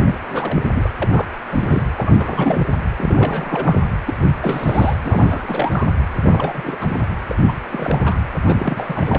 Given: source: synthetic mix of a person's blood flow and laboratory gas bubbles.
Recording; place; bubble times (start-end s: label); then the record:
Doppler ultrasound of blood flow; precordium
0.04-0.15 s: bubbles
0.28-0.63 s: bubbles
0.75-0.90 s: bubbles
1.01-1.27 s: bubbles
1.51-1.83 s: bubbles
1.98-2.65 s: bubbles
2.98-3.81 s: bubbles
4.05-4.14 s: bubbles
4.21-4.26 s: bubbles
4.42-4.96 s: bubbles
5.04-5.87 s: bubbles
6.22-6.76 s: bubbles
6.81-7.08 s: bubbles
7.29-7.35 s: bubbles
7.46-7.56 s: bubbles
7.71-8.16 s: bubbles
8.46-9.19 s: bubbles
From the record:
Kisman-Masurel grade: 342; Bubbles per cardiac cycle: rolling drumbeat, 9 or more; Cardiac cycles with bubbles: 100%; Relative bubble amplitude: moderate (0.250 to 0.450); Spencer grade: 3 (all of the cardiac periods contain showers or single bubble signals, but not dominating or overriding the cardiac motion signals); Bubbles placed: anywhere in the cardiac cycle